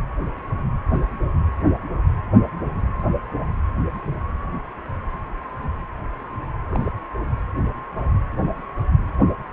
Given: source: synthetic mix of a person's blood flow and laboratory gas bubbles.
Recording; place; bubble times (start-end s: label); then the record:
Doppler ultrasound of blood flow; precordium
6.69-6.92 s: bubbles
From the record:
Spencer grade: 1 (occasional bubble signal discernible with the cardiac motion signal, with majority of cardiac periods free of bubbles); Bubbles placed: anywhere in the cardiac cycle